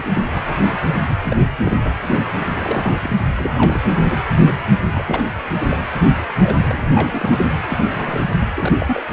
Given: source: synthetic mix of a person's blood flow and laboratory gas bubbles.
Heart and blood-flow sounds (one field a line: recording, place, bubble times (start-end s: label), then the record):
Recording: Doppler ultrasound of blood flow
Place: precordium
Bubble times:
0.00-0.04 s: bubbles
0.14-0.24 s: bubbles
0.31-0.78 s: bubbles
1.09-1.17 s: bubbles
1.25-1.36 s: bubbles
1.65-1.78 s: bubbles
1.83-1.92 s: bubbles
2.18-2.26 s: bubbles
2.40-2.98 s: bubbles
3.01-3.10 s: bubbles
3.36-3.80 s: bubbles
4.04-4.16 s: bubbles
4.38-4.63 s: bubbles
4.89-5.23 s: bubbles
5.69-5.78 s: bubbles
5.95-5.99 s: bubbles
6.41-6.86 s: bubbles
6.94-7.46 s: bubbles
7.68-8.25 s: bubbles
8.39-8.46 s: bubbles
8.55-8.73 s: bubbles
8.80-9.02 s: bubbles
From the record:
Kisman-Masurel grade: 242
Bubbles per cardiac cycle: several, 3 to 8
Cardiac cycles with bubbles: 100%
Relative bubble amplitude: moderate (0.250 to 0.450)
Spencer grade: 3 (all of the cardiac periods contain showers or single bubble signals, but not dominating or overriding the cardiac motion signals)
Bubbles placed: anywhere in the cardiac cycle